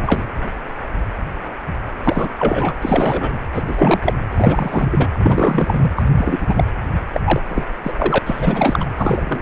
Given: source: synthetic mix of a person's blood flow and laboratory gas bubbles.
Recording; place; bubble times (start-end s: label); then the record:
Doppler ultrasound of blood flow; precordium
0.00-0.23 s: bubbles
2.04-2.29 s: bubbles
2.38-2.74 s: bubbles
2.81-3.40 s: bubbles
3.54-3.62 s: bubbles
3.66-4.14 s: bubbles
4.31-5.08 s: bubbles
5.17-5.91 s: bubbles
5.96-6.03 s: bubbles
6.17-6.64 s: bubbles
7.14-7.21 s: bubbles
7.25-7.42 s: bubbles
7.49-7.66 s: bubbles
7.83-7.93 s: bubbles
7.97-8.18 s: bubbles
8.25-8.89 s: bubbles
8.97-9.42 s: bubbles
From the record:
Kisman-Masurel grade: 333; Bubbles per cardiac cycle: rolling drumbeat, 9 or more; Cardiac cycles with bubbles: 50 to 99%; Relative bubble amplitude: loud (0.450 to 0.775); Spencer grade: 3 (all of the cardiac periods contain showers or single bubble signals, but not dominating or overriding the cardiac motion signals); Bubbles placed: anywhere in the cardiac cycle